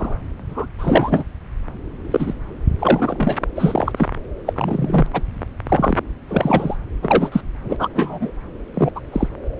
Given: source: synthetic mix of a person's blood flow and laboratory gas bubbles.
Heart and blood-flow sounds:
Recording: Doppler ultrasound of blood flow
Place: subclavian vein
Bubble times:
0.00-0.18 s: bubbles
0.47-0.67 s: bubbles
0.79-1.23 s: bubbles
2.10-2.34 s: bubbles
2.79-3.35 s: bubbles
3.55-3.92 s: bubbles
3.97-4.08 s: bubbles
4.46-4.53 s: bubbles
4.56-5.07 s: bubbles
5.13-5.22 s: bubbles
5.69-5.98 s: bubbles
6.28-6.77 s: bubbles
7.02-7.41 s: bubbles
7.64-7.88 s: bubbles
7.95-8.31 s: bubbles
8.73-8.92 s: bubbles
8.95-9.00 s: bubbles
9.12-9.29 s: bubbles
From the record:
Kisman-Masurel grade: 233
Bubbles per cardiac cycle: several, 3 to 8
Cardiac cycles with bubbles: 50 to 99%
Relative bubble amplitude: loud (0.450 to 0.775)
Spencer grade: 3 (all of the cardiac periods contain showers or single bubble signals, but not dominating or overriding the cardiac motion signals)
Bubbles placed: anywhere in the cardiac cycle

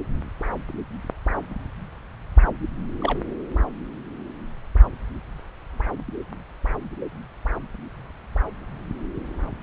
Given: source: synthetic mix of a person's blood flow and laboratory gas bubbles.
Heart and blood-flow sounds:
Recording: Doppler ultrasound of blood flow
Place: subclavian vein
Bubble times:
3.01-3.19 s: bubbles
From the record:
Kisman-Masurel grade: 111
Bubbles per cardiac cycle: 1 to 2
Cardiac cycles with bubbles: 1 to 10%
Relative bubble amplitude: barely perceptible (0.100 to 0.250)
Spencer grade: 1 (occasional bubble signal discernible with the cardiac motion signal, with majority of cardiac periods free of bubbles)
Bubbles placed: anywhere in the cardiac cycle

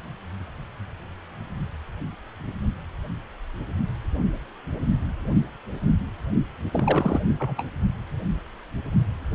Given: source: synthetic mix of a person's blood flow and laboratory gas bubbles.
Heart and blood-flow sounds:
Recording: Doppler ultrasound of blood flow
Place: precordium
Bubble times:
6.72-7.20 s: bubbles
7.27-7.35 s: bubbles
7.40-7.64 s: bubbles
From the record:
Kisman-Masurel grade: 211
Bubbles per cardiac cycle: several, 3 to 8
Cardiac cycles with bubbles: 1 to 10%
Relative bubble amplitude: barely perceptible (0.100 to 0.250)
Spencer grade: 1 (occasional bubble signal discernible with the cardiac motion signal, with majority of cardiac periods free of bubbles)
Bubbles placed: only in the low amplitude regions of the cardiac cycle

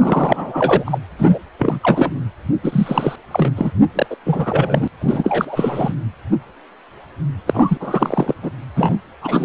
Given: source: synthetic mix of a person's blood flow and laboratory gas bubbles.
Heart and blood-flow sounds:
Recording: Doppler ultrasound of blood flow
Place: precordium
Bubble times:
0.00-0.99 s: bubbles
1.19-1.39 s: bubbles
1.58-1.79 s: bubbles
1.83-2.12 s: bubbles
2.63-3.16 s: bubbles
3.31-3.52 s: bubbles
3.55-3.72 s: bubbles
3.93-4.06 s: bubbles
4.10-4.16 s: bubbles
4.25-4.88 s: bubbles
4.99-5.93 s: bubbles
7.46-7.77 s: bubbles
7.80-8.33 s: bubbles
8.42-8.51 s: bubbles
8.75-8.95 s: bubbles
9.21-9.45 s: bubbles
From the record:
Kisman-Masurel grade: 333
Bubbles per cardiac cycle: rolling drumbeat, 9 or more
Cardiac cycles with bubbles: 50 to 99%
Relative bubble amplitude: loud (0.450 to 0.775)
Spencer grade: 3 (all of the cardiac periods contain showers or single bubble signals, but not dominating or overriding the cardiac motion signals)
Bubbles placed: anywhere in the cardiac cycle

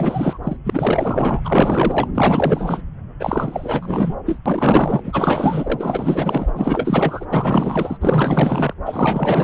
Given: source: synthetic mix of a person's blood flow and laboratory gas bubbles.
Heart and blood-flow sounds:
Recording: Doppler ultrasound of blood flow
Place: subclavian vein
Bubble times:
0.00-0.38 s: bubbles
0.44-0.57 s: bubbles
0.63-1.41 s: bubbles
1.44-2.11 s: bubbles
2.15-2.81 s: bubbles
3.19-4.15 s: bubbles
4.25-4.38 s: bubbles
4.46-6.51 s: bubbles
6.54-7.26 s: bubbles
7.30-7.98 s: bubbles
8.01-8.74 s: bubbles
8.85-9.44 s: bubbles
From the record:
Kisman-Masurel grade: 444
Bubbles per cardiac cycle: continuous sound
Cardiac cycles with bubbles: 100%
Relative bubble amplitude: maximal (0.775 to 0.999)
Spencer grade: 4 (maximum detectable bubble signal sounding continuously throughout systole and diastole of every cardiac period, and overriding the amplitude of the normal cardiac signals)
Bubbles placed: anywhere in the cardiac cycle

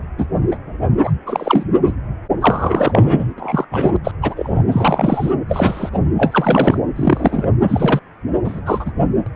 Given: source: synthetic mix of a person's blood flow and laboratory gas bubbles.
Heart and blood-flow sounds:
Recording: Doppler ultrasound of blood flow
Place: precordium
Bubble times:
0.17-0.26 s: bubbles
0.51-0.57 s: bubbles
1.03-1.11 s: bubbles
1.27-1.64 s: bubbles
1.86-1.93 s: bubbles
2.40-3.34 s: bubbles
3.38-3.65 s: bubbles
3.71-3.96 s: bubbles
4.04-4.11 s: bubbles
4.22-4.62 s: bubbles
4.72-5.31 s: bubbles
5.49-5.99 s: bubbles
6.17-6.78 s: bubbles
6.96-7.49 s: bubbles
7.68-8.00 s: bubbles
8.45-8.61 s: bubbles
8.66-8.91 s: bubbles
9.26-9.29 s: bubbles
From the record:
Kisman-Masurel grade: 243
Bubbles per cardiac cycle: several, 3 to 8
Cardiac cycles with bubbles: 100%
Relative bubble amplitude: loud (0.450 to 0.775)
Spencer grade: 3 (all of the cardiac periods contain showers or single bubble signals, but not dominating or overriding the cardiac motion signals)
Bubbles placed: anywhere in the cardiac cycle

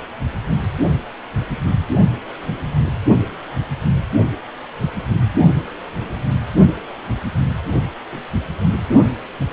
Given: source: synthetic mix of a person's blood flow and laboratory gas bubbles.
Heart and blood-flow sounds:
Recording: Doppler ultrasound of blood flow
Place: precordium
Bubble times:
8.10-8.23 s: bubbles
From the record:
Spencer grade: 1 (occasional bubble signal discernible with the cardiac motion signal, with majority of cardiac periods free of bubbles)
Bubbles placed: only in the low amplitude regions of the cardiac cycle

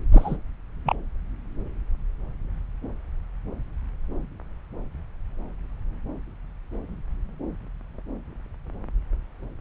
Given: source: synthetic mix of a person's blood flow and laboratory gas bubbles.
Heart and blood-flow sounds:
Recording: Doppler ultrasound of blood flow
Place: subclavian vein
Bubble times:
0.12-0.36 s: bubbles
0.85-0.95 s: bubbles
From the record:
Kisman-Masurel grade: 112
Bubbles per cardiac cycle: 1 to 2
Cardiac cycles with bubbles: 1 to 10%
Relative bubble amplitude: moderate (0.250 to 0.450)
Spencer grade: 1 (occasional bubble signal discernible with the cardiac motion signal, with majority of cardiac periods free of bubbles)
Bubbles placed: anywhere in the cardiac cycle

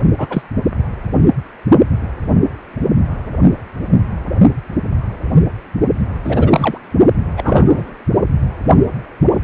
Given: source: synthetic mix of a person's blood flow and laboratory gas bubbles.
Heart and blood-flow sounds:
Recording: Doppler ultrasound of blood flow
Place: precordium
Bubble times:
0.17-0.27 s: bubbles
0.29-0.42 s: bubbles
6.24-6.78 s: bubbles
7.36-7.94 s: bubbles
From the record:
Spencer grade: 2 (many but less than half of the cardiac periods contain bubble signals, singularly or in groups)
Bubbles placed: only in the low amplitude regions of the cardiac cycle

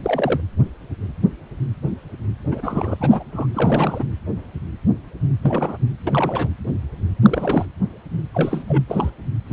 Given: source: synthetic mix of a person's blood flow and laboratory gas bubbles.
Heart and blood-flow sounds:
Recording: Doppler ultrasound of blood flow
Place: precordium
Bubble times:
0.03-0.40 s: bubbles
2.51-3.23 s: bubbles
3.33-3.47 s: bubbles
3.54-4.04 s: bubbles
5.42-5.77 s: bubbles
6.07-6.48 s: bubbles
7.22-7.67 s: bubbles
8.34-8.63 s: bubbles
8.67-8.83 s: bubbles
8.88-9.10 s: bubbles
9.46-9.53 s: bubbles
From the record:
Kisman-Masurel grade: 232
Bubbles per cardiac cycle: several, 3 to 8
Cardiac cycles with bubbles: 50 to 99%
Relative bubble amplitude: moderate (0.250 to 0.450)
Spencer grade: 3 (all of the cardiac periods contain showers or single bubble signals, but not dominating or overriding the cardiac motion signals)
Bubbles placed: anywhere in the cardiac cycle

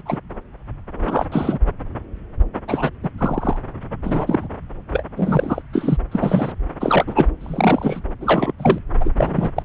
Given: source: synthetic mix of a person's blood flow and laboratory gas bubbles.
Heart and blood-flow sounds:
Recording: Doppler ultrasound of blood flow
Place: subclavian vein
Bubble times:
0.00-0.02 s: bubbles
0.05-0.18 s: bubbles
1.01-1.25 s: bubbles
1.31-1.58 s: bubbles
2.67-2.90 s: bubbles
3.03-3.09 s: bubbles
3.17-3.56 s: bubbles
4.04-4.47 s: bubbles
4.91-5.03 s: bubbles
5.17-5.62 s: bubbles
5.73-5.97 s: bubbles
6.12-6.53 s: bubbles
6.80-7.29 s: bubbles
7.41-8.01 s: bubbles
8.21-8.52 s: bubbles
8.58-8.79 s: bubbles
9.00-9.11 s: bubbles
9.17-9.51 s: bubbles
9.56-9.64 s: bubbles
From the record:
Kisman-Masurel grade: 233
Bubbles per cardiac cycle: several, 3 to 8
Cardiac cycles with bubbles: 50 to 99%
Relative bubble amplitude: loud (0.450 to 0.775)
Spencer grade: 3 (all of the cardiac periods contain showers or single bubble signals, but not dominating or overriding the cardiac motion signals)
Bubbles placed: anywhere in the cardiac cycle

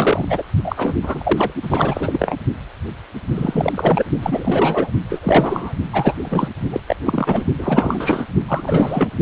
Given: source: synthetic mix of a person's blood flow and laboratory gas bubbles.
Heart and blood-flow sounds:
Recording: Doppler ultrasound of blood flow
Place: precordium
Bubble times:
0.00-0.25 s: bubbles
0.29-0.43 s: bubbles
0.64-0.94 s: bubbles
1.02-1.53 s: bubbles
1.61-2.36 s: bubbles
3.34-4.04 s: bubbles
4.20-4.91 s: bubbles
5.09-5.74 s: bubbles
5.93-6.16 s: bubbles
6.22-6.49 s: bubbles
6.70-6.80 s: bubbles
6.87-6.96 s: bubbles
7.06-7.45 s: bubbles
7.58-8.25 s: bubbles
8.48-9.12 s: bubbles
From the record:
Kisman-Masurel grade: 333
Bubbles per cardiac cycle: rolling drumbeat, 9 or more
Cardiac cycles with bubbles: 50 to 99%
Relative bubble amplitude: loud (0.450 to 0.775)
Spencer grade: 3 (all of the cardiac periods contain showers or single bubble signals, but not dominating or overriding the cardiac motion signals)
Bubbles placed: only in the low amplitude regions of the cardiac cycle

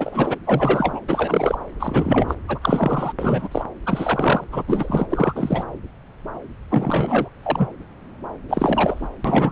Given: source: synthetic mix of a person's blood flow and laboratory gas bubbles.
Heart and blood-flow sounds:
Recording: Doppler ultrasound of blood flow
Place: subclavian vein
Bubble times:
0.00-0.36 s: bubbles
0.43-1.00 s: bubbles
1.07-1.55 s: bubbles
1.80-2.35 s: bubbles
2.47-3.12 s: bubbles
3.18-3.48 s: bubbles
3.51-3.64 s: bubbles
3.86-4.44 s: bubbles
4.51-4.62 s: bubbles
4.67-5.06 s: bubbles
5.10-5.64 s: bubbles
6.70-7.29 s: bubbles
7.42-7.68 s: bubbles
8.48-9.09 s: bubbles
9.24-9.52 s: bubbles
From the record:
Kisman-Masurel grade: 333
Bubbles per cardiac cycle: rolling drumbeat, 9 or more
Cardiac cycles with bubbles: 50 to 99%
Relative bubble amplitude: loud (0.450 to 0.775)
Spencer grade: 3 (all of the cardiac periods contain showers or single bubble signals, but not dominating or overriding the cardiac motion signals)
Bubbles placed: anywhere in the cardiac cycle

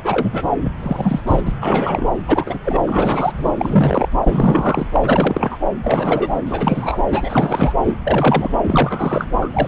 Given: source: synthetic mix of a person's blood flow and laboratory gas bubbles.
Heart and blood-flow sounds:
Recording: Doppler ultrasound of blood flow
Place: subclavian vein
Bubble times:
0.03-0.44 s: bubbles
0.64-0.71 s: bubbles
0.78-1.22 s: bubbles
1.27-1.41 s: bubbles
1.45-1.53 s: bubbles
1.60-2.07 s: bubbles
2.27-2.59 s: bubbles
2.65-2.81 s: bubbles
2.85-3.33 s: bubbles
3.36-3.52 s: bubbles
3.58-4.08 s: bubbles
4.22-4.87 s: bubbles
4.93-5.00 s: bubbles
5.03-5.59 s: bubbles
5.83-6.41 s: bubbles
6.46-7.02 s: bubbles
7.11-7.74 s: bubbles
7.87-7.95 s: bubbles
8.04-8.57 s: bubbles
8.63-9.27 s: bubbles
9.41-9.48 s: bubbles
9.53-9.67 s: bubbles
From the record:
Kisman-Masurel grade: 342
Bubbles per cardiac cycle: rolling drumbeat, 9 or more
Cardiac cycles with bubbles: 100%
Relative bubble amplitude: moderate (0.250 to 0.450)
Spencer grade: 3 (all of the cardiac periods contain showers or single bubble signals, but not dominating or overriding the cardiac motion signals)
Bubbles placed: anywhere in the cardiac cycle

